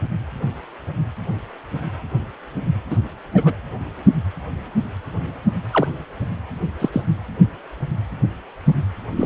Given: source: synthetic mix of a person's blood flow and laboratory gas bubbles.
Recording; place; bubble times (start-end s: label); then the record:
Doppler ultrasound of blood flow; precordium
2.90-2.97 s: bubbles
3.33-3.58 s: bubbles
5.72-5.87 s: bubbles
6.80-6.90 s: bubbles
6.92-7.01 s: bubbles
9.16-9.25 s: bubbles
From the record:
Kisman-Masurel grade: 122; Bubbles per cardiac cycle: 1 to 2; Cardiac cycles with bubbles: 10 to 50%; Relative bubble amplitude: moderate (0.250 to 0.450); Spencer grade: 2 (many but less than half of the cardiac periods contain bubble signals, singularly or in groups); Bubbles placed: anywhere in the cardiac cycle